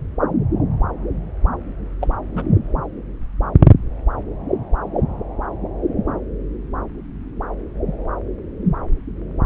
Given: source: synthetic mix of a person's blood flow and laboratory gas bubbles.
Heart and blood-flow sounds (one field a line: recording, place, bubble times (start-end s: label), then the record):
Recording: Doppler ultrasound of blood flow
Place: subclavian vein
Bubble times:
2.01-2.12 s: bubbles
2.34-2.46 s: bubbles
From the record:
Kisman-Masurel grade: 122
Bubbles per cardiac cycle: 1 to 2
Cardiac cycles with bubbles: 10 to 50%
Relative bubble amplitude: moderate (0.250 to 0.450)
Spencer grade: 2 (many but less than half of the cardiac periods contain bubble signals, singularly or in groups)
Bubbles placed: anywhere in the cardiac cycle